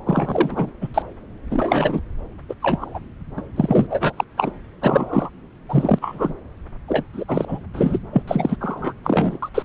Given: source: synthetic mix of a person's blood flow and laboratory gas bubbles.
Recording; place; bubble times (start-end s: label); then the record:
Doppler ultrasound of blood flow; subclavian vein
0.06-0.72 s: bubbles
0.81-0.88 s: bubbles
0.94-1.02 s: bubbles
1.51-2.00 s: bubbles
2.48-2.54 s: bubbles
2.62-2.98 s: bubbles
3.37-3.42 s: bubbles
3.56-3.87 s: bubbles
3.90-4.13 s: bubbles
4.17-4.24 s: bubbles
4.38-4.51 s: bubbles
4.82-5.29 s: bubbles
5.68-5.99 s: bubbles
6.01-6.34 s: bubbles
6.88-7.04 s: bubbles
7.13-7.25 s: bubbles
7.28-7.45 s: bubbles
7.47-7.58 s: bubbles
7.74-7.99 s: bubbles
8.12-8.22 s: bubbles
8.27-8.56 s: bubbles
8.60-8.93 s: bubbles
9.04-9.38 s: bubbles
9.42-9.49 s: bubbles
9.54-9.62 s: bubbles
From the record:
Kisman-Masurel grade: 242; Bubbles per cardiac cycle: several, 3 to 8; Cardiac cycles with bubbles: 100%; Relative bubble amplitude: moderate (0.250 to 0.450); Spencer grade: 3 (all of the cardiac periods contain showers or single bubble signals, but not dominating or overriding the cardiac motion signals); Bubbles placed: anywhere in the cardiac cycle